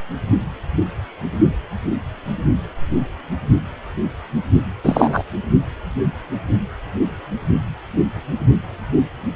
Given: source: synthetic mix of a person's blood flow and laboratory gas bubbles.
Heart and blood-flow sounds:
Doppler ultrasound of blood flow; precordium
4.83-5.23 s: bubbles
From the record:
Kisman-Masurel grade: 213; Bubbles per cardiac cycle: several, 3 to 8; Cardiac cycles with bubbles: 1 to 10%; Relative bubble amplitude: loud (0.450 to 0.775); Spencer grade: 1 (occasional bubble signal discernible with the cardiac motion signal, with majority of cardiac periods free of bubbles); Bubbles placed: anywhere in the cardiac cycle

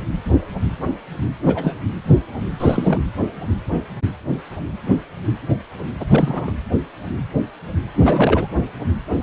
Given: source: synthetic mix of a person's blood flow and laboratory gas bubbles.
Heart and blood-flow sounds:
Doppler ultrasound of blood flow; precordium
1.45-1.75 s: bubbles
2.59-2.99 s: bubbles
6.00-6.05 s: bubbles
6.09-6.53 s: bubbles
7.96-8.47 s: bubbles
From the record:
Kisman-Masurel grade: 222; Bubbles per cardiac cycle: several, 3 to 8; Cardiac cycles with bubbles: 10 to 50%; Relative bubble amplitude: moderate (0.250 to 0.450); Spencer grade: 2 (many but less than half of the cardiac periods contain bubble signals, singularly or in groups); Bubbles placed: anywhere in the cardiac cycle

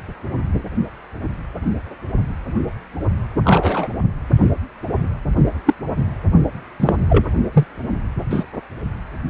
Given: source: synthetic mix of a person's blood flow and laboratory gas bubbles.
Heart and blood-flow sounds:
Doppler ultrasound of blood flow; precordium
3.45-3.88 s: bubbles
5.66-5.74 s: bubbles
6.79-6.96 s: bubbles
7.08-7.26 s: bubbles
7.53-7.64 s: bubbles
8.30-8.45 s: bubbles
From the record:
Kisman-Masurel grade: 123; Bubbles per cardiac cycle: 1 to 2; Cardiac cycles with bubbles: 10 to 50%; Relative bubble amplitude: loud (0.450 to 0.775); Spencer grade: 2 (many but less than half of the cardiac periods contain bubble signals, singularly or in groups); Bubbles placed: anywhere in the cardiac cycle

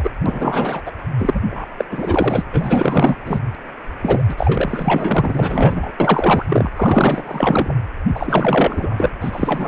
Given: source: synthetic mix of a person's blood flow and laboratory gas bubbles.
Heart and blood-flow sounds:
Doppler ultrasound of blood flow; precordium
0.00-0.11 s: bubbles
0.26-0.82 s: bubbles
0.85-0.92 s: bubbles
1.19-1.41 s: bubbles
1.50-1.68 s: bubbles
1.78-1.85 s: bubbles
1.91-2.42 s: bubbles
2.52-3.16 s: bubbles
3.25-3.40 s: bubbles
4.02-4.24 s: bubbles
4.29-5.92 s: bubbles
6.00-6.46 s: bubbles
6.49-6.70 s: bubbles
6.76-7.75 s: bubbles
8.14-9.11 s: bubbles
9.20-9.68 s: bubbles
From the record:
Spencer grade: 4 (maximum detectable bubble signal sounding continuously throughout systole and diastole of every cardiac period, and overriding the amplitude of the normal cardiac signals); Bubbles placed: anywhere in the cardiac cycle

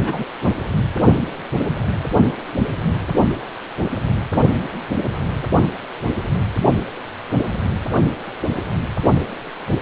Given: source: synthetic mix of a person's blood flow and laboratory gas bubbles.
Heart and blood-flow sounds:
Doppler ultrasound of blood flow; precordium
0.05-0.26 s: bubbles
0.44-0.52 s: bubbles
From the record:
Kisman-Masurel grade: 212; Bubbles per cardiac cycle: several, 3 to 8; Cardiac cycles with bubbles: 1 to 10%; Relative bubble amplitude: moderate (0.250 to 0.450); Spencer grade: 1 (occasional bubble signal discernible with the cardiac motion signal, with majority of cardiac periods free of bubbles); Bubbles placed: only in the low amplitude regions of the cardiac cycle

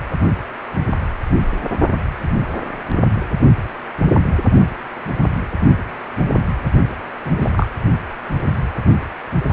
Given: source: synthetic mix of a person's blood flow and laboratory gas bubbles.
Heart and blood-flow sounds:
Doppler ultrasound of blood flow; precordium
7.24-7.66 s: bubbles
From the record:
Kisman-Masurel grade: 212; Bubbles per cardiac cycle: several, 3 to 8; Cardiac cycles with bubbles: 1 to 10%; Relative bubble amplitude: moderate (0.250 to 0.450); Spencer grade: 1 (occasional bubble signal discernible with the cardiac motion signal, with majority of cardiac periods free of bubbles); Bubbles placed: anywhere in the cardiac cycle

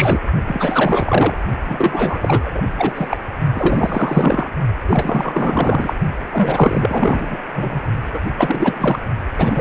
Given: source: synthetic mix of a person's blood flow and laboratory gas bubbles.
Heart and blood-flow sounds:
Doppler ultrasound of blood flow; precordium
0.00-0.20 s: bubbles
0.47-1.38 s: bubbles
1.65-2.62 s: bubbles
2.77-3.17 s: bubbles
3.54-4.50 s: bubbles
4.85-5.93 s: bubbles
6.29-7.37 s: bubbles
7.53-7.80 s: bubbles
8.13-8.20 s: bubbles
8.37-8.99 s: bubbles
9.38-9.61 s: bubbles
From the record:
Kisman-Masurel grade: 444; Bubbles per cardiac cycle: continuous sound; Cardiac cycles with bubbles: 100%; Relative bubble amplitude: maximal (0.775 to 0.999); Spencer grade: 4 (maximum detectable bubble signal sounding continuously throughout systole and diastole of every cardiac period, and overriding the amplitude of the normal cardiac signals); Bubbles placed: only in the low amplitude regions of the cardiac cycle

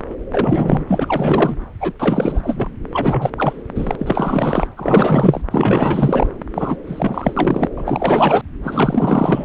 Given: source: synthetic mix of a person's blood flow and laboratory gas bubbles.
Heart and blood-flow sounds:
Doppler ultrasound of blood flow; subclavian vein
0.09-0.15 s: bubbles
0.33-0.84 s: bubbles
0.88-1.55 s: bubbles
1.80-1.93 s: bubbles
1.99-2.69 s: bubbles
2.92-3.30 s: bubbles
3.37-3.63 s: bubbles
3.75-3.96 s: bubbles
3.98-4.67 s: bubbles
4.77-5.42 s: bubbles
5.50-6.28 s: bubbles
6.54-6.77 s: bubbles
6.87-7.69 s: bubbles
7.77-8.42 s: bubbles
8.64-9.45 s: bubbles
From the record:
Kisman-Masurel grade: 444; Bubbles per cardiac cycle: continuous sound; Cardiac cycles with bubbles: 100%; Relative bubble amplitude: maximal (0.775 to 0.999); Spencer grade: 4 (maximum detectable bubble signal sounding continuously throughout systole and diastole of every cardiac period, and overriding the amplitude of the normal cardiac signals); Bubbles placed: anywhere in the cardiac cycle

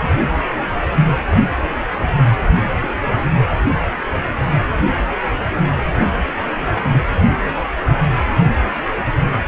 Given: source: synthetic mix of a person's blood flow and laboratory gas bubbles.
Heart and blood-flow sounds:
Doppler ultrasound of blood flow; precordium
0.09-0.15 s: bubbles
2.80-2.94 s: bubbles
3.04-3.22 s: bubbles
6.77-6.84 s: bubbles
6.87-7.03 s: bubbles
From the record:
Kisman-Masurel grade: 121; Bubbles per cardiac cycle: 1 to 2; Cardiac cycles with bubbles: 10 to 50%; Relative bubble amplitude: barely perceptible (0.100 to 0.250); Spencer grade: 2 (many but less than half of the cardiac periods contain bubble signals, singularly or in groups); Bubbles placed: only in the low amplitude regions of the cardiac cycle

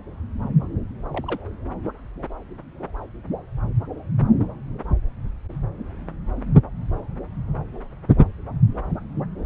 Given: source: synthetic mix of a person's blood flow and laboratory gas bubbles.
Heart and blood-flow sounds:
Doppler ultrasound of blood flow; subclavian vein
1.11-1.40 s: bubbles
From the record:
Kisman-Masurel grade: 111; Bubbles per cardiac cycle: 1 to 2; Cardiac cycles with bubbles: 1 to 10%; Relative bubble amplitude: barely perceptible (0.100 to 0.250); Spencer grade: 1 (occasional bubble signal discernible with the cardiac motion signal, with majority of cardiac periods free of bubbles); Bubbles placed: anywhere in the cardiac cycle

